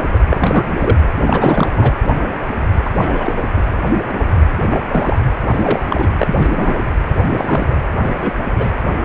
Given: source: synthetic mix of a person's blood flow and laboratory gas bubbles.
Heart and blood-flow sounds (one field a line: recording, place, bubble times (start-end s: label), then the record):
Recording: Doppler ultrasound of blood flow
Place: precordium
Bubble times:
0.14-0.20 s: bubbles
0.30-0.65 s: bubbles
0.80-0.98 s: bubbles
1.17-1.92 s: bubbles
2.84-2.91 s: bubbles
2.96-3.34 s: bubbles
3.56-3.65 s: bubbles
4.70-4.81 s: bubbles
4.89-5.18 s: bubbles
5.48-6.10 s: bubbles
6.18-6.75 s: bubbles
7.37-7.67 s: bubbles
7.71-7.75 s: bubbles
7.97-8.45 s: bubbles
8.59-8.72 s: bubbles
From the record:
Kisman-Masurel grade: 233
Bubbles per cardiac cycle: several, 3 to 8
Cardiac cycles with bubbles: 50 to 99%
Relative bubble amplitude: loud (0.450 to 0.775)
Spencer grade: 3 (all of the cardiac periods contain showers or single bubble signals, but not dominating or overriding the cardiac motion signals)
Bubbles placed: anywhere in the cardiac cycle